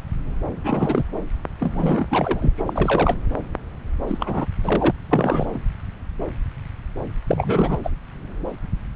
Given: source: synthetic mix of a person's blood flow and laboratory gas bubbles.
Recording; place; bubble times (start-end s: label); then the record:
Doppler ultrasound of blood flow; subclavian vein
0.64-1.02 s: bubbles
1.60-2.05 s: bubbles
2.09-2.52 s: bubbles
2.57-3.16 s: bubbles
4.07-4.46 s: bubbles
4.63-4.92 s: bubbles
5.09-5.59 s: bubbles
7.26-7.78 s: bubbles
7.83-7.90 s: bubbles
From the record:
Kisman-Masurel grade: 332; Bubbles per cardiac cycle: rolling drumbeat, 9 or more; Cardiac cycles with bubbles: 50 to 99%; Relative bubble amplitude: moderate (0.250 to 0.450); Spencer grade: 3 (all of the cardiac periods contain showers or single bubble signals, but not dominating or overriding the cardiac motion signals); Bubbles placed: anywhere in the cardiac cycle